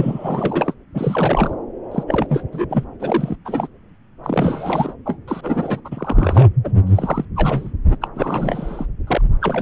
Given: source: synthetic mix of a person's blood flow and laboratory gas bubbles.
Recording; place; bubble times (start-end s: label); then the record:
Doppler ultrasound of blood flow; subclavian vein
0.00-0.74 s: bubbles
0.95-1.54 s: bubbles
1.91-2.04 s: bubbles
2.08-2.43 s: bubbles
2.52-2.66 s: bubbles
2.70-2.84 s: bubbles
3.00-3.36 s: bubbles
3.45-3.67 s: bubbles
4.24-4.93 s: bubbles
5.05-5.18 s: bubbles
5.28-5.82 s: bubbles
5.84-6.48 s: bubbles
6.64-6.72 s: bubbles
6.87-7.25 s: bubbles
7.35-7.72 s: bubbles
7.90-7.97 s: bubbles
8.02-8.08 s: bubbles
8.15-8.86 s: bubbles
9.07-9.22 s: bubbles
9.41-9.62 s: bubbles
From the record:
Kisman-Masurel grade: 342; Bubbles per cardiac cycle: rolling drumbeat, 9 or more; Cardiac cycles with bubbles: 100%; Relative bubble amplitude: moderate (0.250 to 0.450); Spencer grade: 3 (all of the cardiac periods contain showers or single bubble signals, but not dominating or overriding the cardiac motion signals); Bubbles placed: anywhere in the cardiac cycle